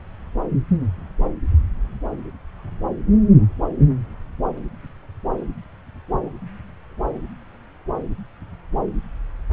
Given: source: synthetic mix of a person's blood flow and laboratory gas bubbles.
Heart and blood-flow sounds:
Doppler ultrasound of blood flow; subclavian vein
no bubbles
From the record:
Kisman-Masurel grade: 000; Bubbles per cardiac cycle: 0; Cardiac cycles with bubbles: 0%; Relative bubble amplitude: no bubbles discernible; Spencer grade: 0 (complete lack of bubble signals)

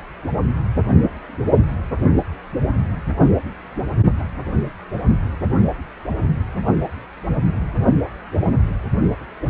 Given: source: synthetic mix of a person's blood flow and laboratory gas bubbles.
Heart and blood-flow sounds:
Doppler ultrasound of blood flow; precordium
9.46-9.50 s: bubbles
From the record:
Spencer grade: 2 (many but less than half of the cardiac periods contain bubble signals, singularly or in groups); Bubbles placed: only in the low amplitude regions of the cardiac cycle

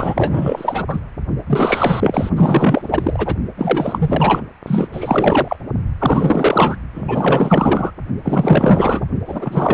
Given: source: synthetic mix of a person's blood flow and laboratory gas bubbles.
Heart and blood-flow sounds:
Doppler ultrasound of blood flow; precordium
0.00-1.00 s: bubbles
1.46-2.29 s: bubbles
2.36-3.35 s: bubbles
3.56-4.41 s: bubbles
4.67-4.88 s: bubbles
4.92-5.57 s: bubbles
5.99-6.77 s: bubbles
6.94-7.91 s: bubbles
8.23-9.05 s: bubbles
9.27-9.74 s: bubbles
From the record:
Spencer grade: 4 (maximum detectable bubble signal sounding continuously throughout systole and diastole of every cardiac period, and overriding the amplitude of the normal cardiac signals); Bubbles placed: only in the low amplitude regions of the cardiac cycle

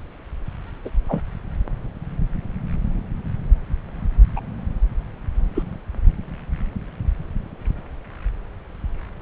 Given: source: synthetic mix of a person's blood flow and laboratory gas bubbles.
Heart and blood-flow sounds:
Doppler ultrasound of blood flow; subclavian vein
0.85-0.90 s: bubbles
1.09-1.22 s: bubbles
4.36-4.40 s: bubbles
5.54-5.62 s: bubbles
From the record:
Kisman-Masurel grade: 122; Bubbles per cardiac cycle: 1 to 2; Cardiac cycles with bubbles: 10 to 50%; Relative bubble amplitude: moderate (0.250 to 0.450); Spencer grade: 2 (many but less than half of the cardiac periods contain bubble signals, singularly or in groups); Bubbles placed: anywhere in the cardiac cycle

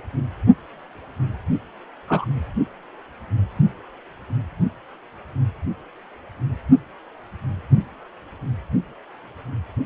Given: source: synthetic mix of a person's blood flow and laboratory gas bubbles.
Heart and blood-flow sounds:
Doppler ultrasound of blood flow; precordium
2.08-2.25 s: bubbles
From the record:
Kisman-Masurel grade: 112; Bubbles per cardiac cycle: 1 to 2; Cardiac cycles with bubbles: 1 to 10%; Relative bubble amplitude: moderate (0.250 to 0.450); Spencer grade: 1 (occasional bubble signal discernible with the cardiac motion signal, with majority of cardiac periods free of bubbles); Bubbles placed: only in the low amplitude regions of the cardiac cycle

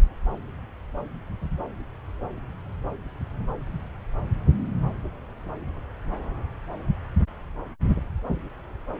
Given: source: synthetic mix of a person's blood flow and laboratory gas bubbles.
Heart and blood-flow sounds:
Doppler ultrasound of blood flow; subclavian vein
no bubbles
From the record:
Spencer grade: 0 (complete lack of bubble signals)

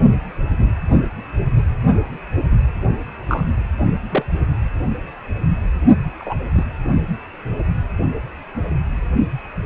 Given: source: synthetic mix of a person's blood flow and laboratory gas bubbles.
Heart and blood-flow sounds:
Doppler ultrasound of blood flow; precordium
3.28-3.46 s: bubbles
4.09-4.23 s: bubbles
6.19-6.34 s: bubbles
6.54-6.64 s: bubbles
From the record:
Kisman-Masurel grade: 122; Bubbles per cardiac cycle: 1 to 2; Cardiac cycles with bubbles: 10 to 50%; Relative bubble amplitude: moderate (0.250 to 0.450); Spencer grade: 2 (many but less than half of the cardiac periods contain bubble signals, singularly or in groups); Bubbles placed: only in the low amplitude regions of the cardiac cycle

